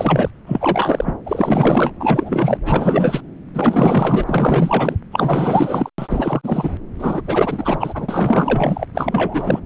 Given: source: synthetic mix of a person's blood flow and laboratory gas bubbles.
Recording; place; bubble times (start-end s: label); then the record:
Doppler ultrasound of blood flow; subclavian vein
0.00-0.30 s: bubbles
0.46-1.14 s: bubbles
1.25-1.92 s: bubbles
1.99-2.58 s: bubbles
2.64-3.21 s: bubbles
3.54-4.97 s: bubbles
5.11-5.90 s: bubbles
5.98-6.71 s: bubbles
6.98-8.85 s: bubbles
8.94-9.60 s: bubbles
From the record:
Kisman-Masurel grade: 444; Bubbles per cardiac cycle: continuous sound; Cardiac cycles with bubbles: 100%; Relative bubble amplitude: maximal (0.775 to 0.999); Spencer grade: 4 (maximum detectable bubble signal sounding continuously throughout systole and diastole of every cardiac period, and overriding the amplitude of the normal cardiac signals); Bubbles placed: anywhere in the cardiac cycle